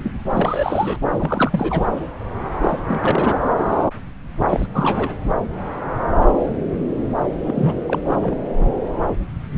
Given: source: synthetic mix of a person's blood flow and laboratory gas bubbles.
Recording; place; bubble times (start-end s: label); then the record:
Doppler ultrasound of blood flow; subclavian vein
0.00-0.11 s: bubbles
0.30-0.98 s: bubbles
1.17-1.89 s: bubbles
2.60-2.78 s: bubbles
2.88-3.37 s: bubbles
4.50-4.66 s: bubbles
4.73-5.15 s: bubbles
7.44-7.76 s: bubbles
7.88-7.99 s: bubbles
8.05-8.18 s: bubbles
8.22-8.40 s: bubbles
8.59-8.66 s: bubbles
From the record:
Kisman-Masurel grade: 332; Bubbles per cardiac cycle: rolling drumbeat, 9 or more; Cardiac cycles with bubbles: 50 to 99%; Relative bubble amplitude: moderate (0.250 to 0.450); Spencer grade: 3 (all of the cardiac periods contain showers or single bubble signals, but not dominating or overriding the cardiac motion signals); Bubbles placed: anywhere in the cardiac cycle